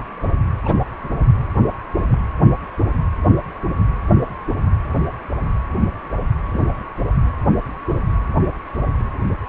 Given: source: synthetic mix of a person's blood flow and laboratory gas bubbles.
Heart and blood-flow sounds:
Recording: Doppler ultrasound of blood flow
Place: precordium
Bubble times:
0.64-0.76 s: bubbles
1.94-2.01 s: bubbles
2.08-2.18 s: bubbles
6.53-6.66 s: bubbles
From the record:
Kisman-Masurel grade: 121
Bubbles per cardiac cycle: 1 to 2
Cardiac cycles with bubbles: 10 to 50%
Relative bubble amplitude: barely perceptible (0.100 to 0.250)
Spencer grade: 2 (many but less than half of the cardiac periods contain bubble signals, singularly or in groups)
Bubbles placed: anywhere in the cardiac cycle

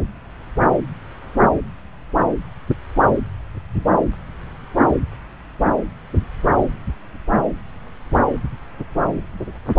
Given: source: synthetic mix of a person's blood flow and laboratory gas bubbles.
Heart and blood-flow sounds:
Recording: Doppler ultrasound of blood flow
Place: subclavian vein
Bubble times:
no bubbles
From the record:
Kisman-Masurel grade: 000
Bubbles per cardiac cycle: 0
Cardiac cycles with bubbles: 0%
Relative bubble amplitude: no bubbles discernible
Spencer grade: 0 (complete lack of bubble signals)

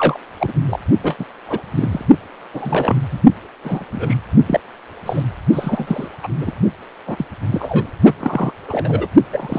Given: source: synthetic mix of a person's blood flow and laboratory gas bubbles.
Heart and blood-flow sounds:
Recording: Doppler ultrasound of blood flow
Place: precordium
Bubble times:
0.00-0.19 s: bubbles
0.40-0.53 s: bubbles
0.67-0.79 s: bubbles
1.02-1.15 s: bubbles
1.19-1.25 s: bubbles
1.48-1.62 s: bubbles
1.75-2.05 s: bubbles
2.53-3.00 s: bubbles
3.11-3.20 s: bubbles
3.63-3.85 s: bubbles
3.92-4.17 s: bubbles
4.46-4.60 s: bubbles
5.06-5.23 s: bubbles
5.53-6.08 s: bubbles
6.23-6.28 s: bubbles
6.37-6.52 s: bubbles
7.07-7.26 s: bubbles
7.52-7.87 s: bubbles
8.04-8.13 s: bubbles
8.21-8.52 s: bubbles
8.68-9.07 s: bubbles
9.32-9.59 s: bubbles
From the record:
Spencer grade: 3 (all of the cardiac periods contain showers or single bubble signals, but not dominating or overriding the cardiac motion signals)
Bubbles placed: only in the low amplitude regions of the cardiac cycle

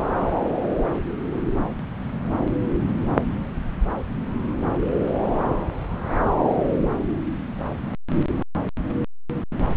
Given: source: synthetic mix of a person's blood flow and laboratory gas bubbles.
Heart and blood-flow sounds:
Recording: Doppler ultrasound of blood flow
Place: subclavian vein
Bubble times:
no bubbles
From the record:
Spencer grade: 0 (complete lack of bubble signals)

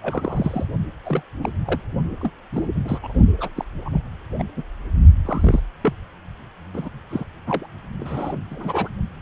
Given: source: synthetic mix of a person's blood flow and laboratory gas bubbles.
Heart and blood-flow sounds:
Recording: Doppler ultrasound of blood flow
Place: precordium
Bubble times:
0.01-0.65 s: bubbles
1.06-1.22 s: bubbles
1.42-1.50 s: bubbles
1.65-1.81 s: bubbles
2.21-2.31 s: bubbles
2.53-2.67 s: bubbles
2.75-2.98 s: bubbles
3.02-3.17 s: bubbles
3.38-3.48 s: bubbles
3.56-3.65 s: bubbles
3.85-4.02 s: bubbles
4.38-4.43 s: bubbles
4.57-4.63 s: bubbles
5.25-5.60 s: bubbles
5.82-5.93 s: bubbles
6.73-6.89 s: bubbles
7.11-7.25 s: bubbles
7.46-7.66 s: bubbles
7.99-8.41 s: bubbles
8.50-8.88 s: bubbles
From the record:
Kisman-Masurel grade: 242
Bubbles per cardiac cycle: several, 3 to 8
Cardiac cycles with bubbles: 100%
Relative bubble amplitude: moderate (0.250 to 0.450)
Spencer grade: 3 (all of the cardiac periods contain showers or single bubble signals, but not dominating or overriding the cardiac motion signals)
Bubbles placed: only in the low amplitude regions of the cardiac cycle

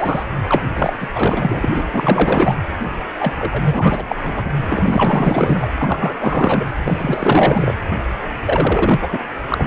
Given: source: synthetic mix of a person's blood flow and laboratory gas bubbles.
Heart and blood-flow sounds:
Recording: Doppler ultrasound of blood flow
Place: precordium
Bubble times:
0.00-0.24 s: bubbles
0.47-0.68 s: bubbles
0.74-1.07 s: bubbles
1.14-1.83 s: bubbles
1.92-2.58 s: bubbles
3.19-3.35 s: bubbles
3.39-4.04 s: bubbles
4.08-4.16 s: bubbles
4.22-4.51 s: bubbles
4.62-5.68 s: bubbles
5.77-6.16 s: bubbles
6.19-6.68 s: bubbles
6.85-7.76 s: bubbles
8.45-9.09 s: bubbles
9.12-9.19 s: bubbles
9.48-9.67 s: bubbles
From the record:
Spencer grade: 4 (maximum detectable bubble signal sounding continuously throughout systole and diastole of every cardiac period, and overriding the amplitude of the normal cardiac signals)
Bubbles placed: anywhere in the cardiac cycle

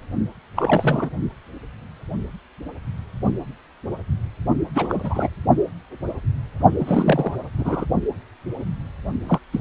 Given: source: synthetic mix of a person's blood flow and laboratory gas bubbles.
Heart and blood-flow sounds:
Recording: Doppler ultrasound of blood flow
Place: precordium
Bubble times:
0.56-1.10 s: bubbles
4.75-5.29 s: bubbles
6.79-7.35 s: bubbles
7.57-7.85 s: bubbles
9.27-9.39 s: bubbles
9.52-9.61 s: bubbles
From the record:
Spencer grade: 3 (all of the cardiac periods contain showers or single bubble signals, but not dominating or overriding the cardiac motion signals)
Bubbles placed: only in the low amplitude regions of the cardiac cycle

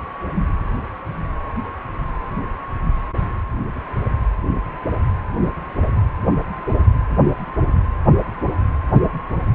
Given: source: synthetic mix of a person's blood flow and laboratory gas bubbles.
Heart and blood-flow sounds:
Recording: Doppler ultrasound of blood flow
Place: precordium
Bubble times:
no bubbles
From the record:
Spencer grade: 0 (complete lack of bubble signals)

